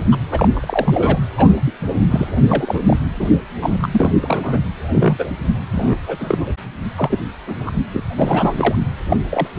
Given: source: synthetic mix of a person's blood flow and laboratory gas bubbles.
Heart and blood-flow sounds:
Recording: Doppler ultrasound of blood flow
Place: precordium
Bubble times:
0.11-0.18 s: bubbles
0.29-1.19 s: bubbles
1.37-1.59 s: bubbles
1.66-1.71 s: bubbles
1.96-2.05 s: bubbles
2.08-2.27 s: bubbles
2.46-2.96 s: bubbles
3.19-3.27 s: bubbles
3.61-3.87 s: bubbles
3.91-4.15 s: bubbles
4.20-4.61 s: bubbles
4.89-5.31 s: bubbles
5.75-5.96 s: bubbles
6.06-6.38 s: bubbles
6.96-7.19 s: bubbles
7.47-7.71 s: bubbles
7.94-8.02 s: bubbles
8.16-8.75 s: bubbles
9.09-9.17 s: bubbles
9.29-9.47 s: bubbles
From the record:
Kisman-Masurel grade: 242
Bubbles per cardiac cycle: several, 3 to 8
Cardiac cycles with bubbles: 100%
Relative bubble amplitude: moderate (0.250 to 0.450)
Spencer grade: 3 (all of the cardiac periods contain showers or single bubble signals, but not dominating or overriding the cardiac motion signals)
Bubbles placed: anywhere in the cardiac cycle

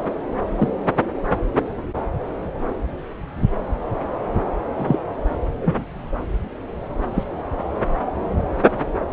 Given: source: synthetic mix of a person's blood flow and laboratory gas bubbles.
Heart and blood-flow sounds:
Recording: Doppler ultrasound of blood flow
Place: subclavian vein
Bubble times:
0.56-0.68 s: bubbles
4.75-4.97 s: bubbles
5.61-5.84 s: bubbles
7.14-7.24 s: bubbles
From the record:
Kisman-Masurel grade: 123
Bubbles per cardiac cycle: 1 to 2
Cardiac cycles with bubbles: 10 to 50%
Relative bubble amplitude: loud (0.450 to 0.775)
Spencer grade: 2 (many but less than half of the cardiac periods contain bubble signals, singularly or in groups)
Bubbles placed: anywhere in the cardiac cycle

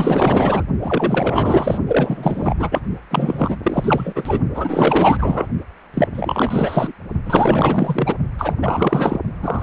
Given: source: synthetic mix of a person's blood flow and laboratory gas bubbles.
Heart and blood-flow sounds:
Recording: Doppler ultrasound of blood flow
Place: precordium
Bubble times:
0.00-0.64 s: bubbles
0.81-1.78 s: bubbles
1.87-2.57 s: bubbles
2.59-2.82 s: bubbles
3.10-3.57 s: bubbles
3.62-4.40 s: bubbles
4.54-5.47 s: bubbles
5.94-6.08 s: bubbles
6.13-6.92 s: bubbles
7.26-8.16 s: bubbles
8.38-8.55 s: bubbles
8.62-9.20 s: bubbles
9.42-9.63 s: bubbles
From the record:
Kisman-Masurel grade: 444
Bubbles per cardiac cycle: continuous sound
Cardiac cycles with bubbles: 100%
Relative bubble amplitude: maximal (0.775 to 0.999)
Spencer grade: 4 (maximum detectable bubble signal sounding continuously throughout systole and diastole of every cardiac period, and overriding the amplitude of the normal cardiac signals)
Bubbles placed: only in the low amplitude regions of the cardiac cycle

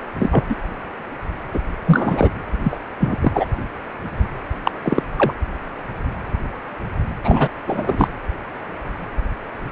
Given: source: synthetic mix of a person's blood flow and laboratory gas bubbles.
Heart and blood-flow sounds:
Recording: Doppler ultrasound of blood flow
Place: precordium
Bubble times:
0.19-0.45 s: bubbles
0.50-0.55 s: bubbles
1.52-1.59 s: bubbles
1.85-2.29 s: bubbles
2.63-2.77 s: bubbles
3.00-3.17 s: bubbles
3.21-3.46 s: bubbles
4.63-4.71 s: bubbles
4.83-5.03 s: bubbles
5.17-5.33 s: bubbles
7.24-7.49 s: bubbles
7.67-8.08 s: bubbles
From the record:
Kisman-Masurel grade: 233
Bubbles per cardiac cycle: several, 3 to 8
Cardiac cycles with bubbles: 50 to 99%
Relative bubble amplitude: loud (0.450 to 0.775)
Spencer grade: 3 (all of the cardiac periods contain showers or single bubble signals, but not dominating or overriding the cardiac motion signals)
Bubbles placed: anywhere in the cardiac cycle

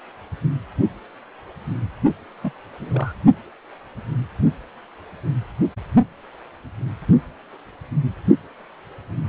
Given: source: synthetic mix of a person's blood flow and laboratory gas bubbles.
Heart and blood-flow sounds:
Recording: Doppler ultrasound of blood flow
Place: precordium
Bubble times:
2.42-2.51 s: bubbles
2.80-3.12 s: bubbles
From the record:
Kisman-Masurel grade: 211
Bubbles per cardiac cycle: several, 3 to 8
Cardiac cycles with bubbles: 1 to 10%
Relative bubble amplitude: barely perceptible (0.100 to 0.250)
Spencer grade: 1 (occasional bubble signal discernible with the cardiac motion signal, with majority of cardiac periods free of bubbles)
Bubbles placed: only in the low amplitude regions of the cardiac cycle

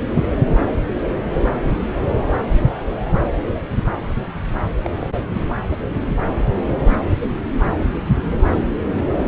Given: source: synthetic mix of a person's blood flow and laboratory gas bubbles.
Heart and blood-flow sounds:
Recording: Doppler ultrasound of blood flow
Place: subclavian vein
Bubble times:
4.82-5.10 s: bubbles
From the record:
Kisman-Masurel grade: 111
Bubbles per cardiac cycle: 1 to 2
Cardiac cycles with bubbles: 1 to 10%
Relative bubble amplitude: barely perceptible (0.100 to 0.250)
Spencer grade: 1 (occasional bubble signal discernible with the cardiac motion signal, with majority of cardiac periods free of bubbles)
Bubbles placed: anywhere in the cardiac cycle

